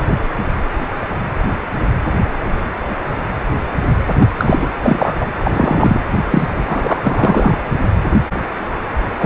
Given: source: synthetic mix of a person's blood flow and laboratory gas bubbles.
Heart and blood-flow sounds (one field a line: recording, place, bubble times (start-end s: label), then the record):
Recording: Doppler ultrasound of blood flow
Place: precordium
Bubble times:
4.19-4.29 s: bubbles
4.37-4.68 s: bubbles
4.83-5.26 s: bubbles
5.38-6.01 s: bubbles
6.30-6.47 s: bubbles
6.54-7.58 s: bubbles
9.18-9.26 s: bubbles
From the record:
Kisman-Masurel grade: 223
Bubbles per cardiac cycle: several, 3 to 8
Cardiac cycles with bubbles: 10 to 50%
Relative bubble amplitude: loud (0.450 to 0.775)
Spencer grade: 2 (many but less than half of the cardiac periods contain bubble signals, singularly or in groups)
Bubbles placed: anywhere in the cardiac cycle